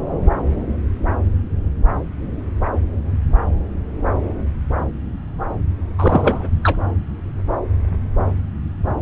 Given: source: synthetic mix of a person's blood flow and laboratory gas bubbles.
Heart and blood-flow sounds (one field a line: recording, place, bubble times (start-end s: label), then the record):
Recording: Doppler ultrasound of blood flow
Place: subclavian vein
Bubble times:
5.98-6.50 s: bubbles
6.63-6.78 s: bubbles
From the record:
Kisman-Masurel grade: 213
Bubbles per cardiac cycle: several, 3 to 8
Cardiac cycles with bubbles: 1 to 10%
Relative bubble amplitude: loud (0.450 to 0.775)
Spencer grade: 1 (occasional bubble signal discernible with the cardiac motion signal, with majority of cardiac periods free of bubbles)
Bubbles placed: anywhere in the cardiac cycle